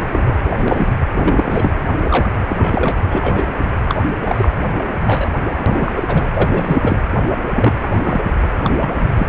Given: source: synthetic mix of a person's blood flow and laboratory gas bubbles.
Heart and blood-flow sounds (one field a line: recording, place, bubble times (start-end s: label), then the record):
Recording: Doppler ultrasound of blood flow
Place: precordium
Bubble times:
0.12-0.21 s: bubbles
0.26-0.60 s: bubbles
0.68-0.87 s: bubbles
1.19-1.72 s: bubbles
2.04-2.29 s: bubbles
2.49-2.97 s: bubbles
3.10-3.51 s: bubbles
3.88-4.04 s: bubbles
4.25-4.49 s: bubbles
4.63-4.69 s: bubbles
5.04-5.29 s: bubbles
5.66-5.92 s: bubbles
5.96-6.04 s: bubbles
6.07-6.29 s: bubbles
6.34-6.50 s: bubbles
6.54-6.97 s: bubbles
7.54-7.73 s: bubbles
7.80-7.90 s: bubbles
8.04-8.25 s: bubbles
8.63-8.71 s: bubbles
8.80-9.08 s: bubbles
9.14-9.25 s: bubbles
From the record:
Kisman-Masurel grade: 243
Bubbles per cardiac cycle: several, 3 to 8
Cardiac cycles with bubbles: 100%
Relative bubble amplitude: loud (0.450 to 0.775)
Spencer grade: 3 (all of the cardiac periods contain showers or single bubble signals, but not dominating or overriding the cardiac motion signals)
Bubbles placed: anywhere in the cardiac cycle